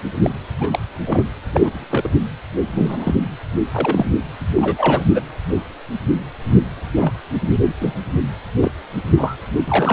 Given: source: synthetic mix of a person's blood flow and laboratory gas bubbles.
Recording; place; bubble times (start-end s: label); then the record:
Doppler ultrasound of blood flow; precordium
0.23-0.30 s: bubbles
0.57-0.79 s: bubbles
1.05-1.29 s: bubbles
1.52-1.86 s: bubbles
1.91-2.09 s: bubbles
2.68-3.15 s: bubbles
3.71-4.12 s: bubbles
4.54-5.04 s: bubbles
5.14-5.21 s: bubbles
6.96-7.12 s: bubbles
7.81-7.94 s: bubbles
8.60-8.71 s: bubbles
9.17-9.37 s: bubbles
9.68-9.93 s: bubbles
From the record:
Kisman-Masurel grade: 232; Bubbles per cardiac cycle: several, 3 to 8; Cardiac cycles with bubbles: 50 to 99%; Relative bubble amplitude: moderate (0.250 to 0.450); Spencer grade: 3 (all of the cardiac periods contain showers or single bubble signals, but not dominating or overriding the cardiac motion signals); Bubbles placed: anywhere in the cardiac cycle